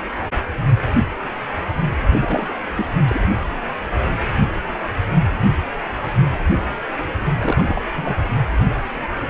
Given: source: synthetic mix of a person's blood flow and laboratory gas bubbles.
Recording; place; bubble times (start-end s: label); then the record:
Doppler ultrasound of blood flow; precordium
2.10-2.49 s: bubbles
2.77-2.86 s: bubbles
3.04-3.21 s: bubbles
7.38-7.82 s: bubbles
7.92-8.16 s: bubbles
From the record:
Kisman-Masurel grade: 222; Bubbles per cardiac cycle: several, 3 to 8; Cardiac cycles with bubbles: 10 to 50%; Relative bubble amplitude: moderate (0.250 to 0.450); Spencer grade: 2 (many but less than half of the cardiac periods contain bubble signals, singularly or in groups); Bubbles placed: anywhere in the cardiac cycle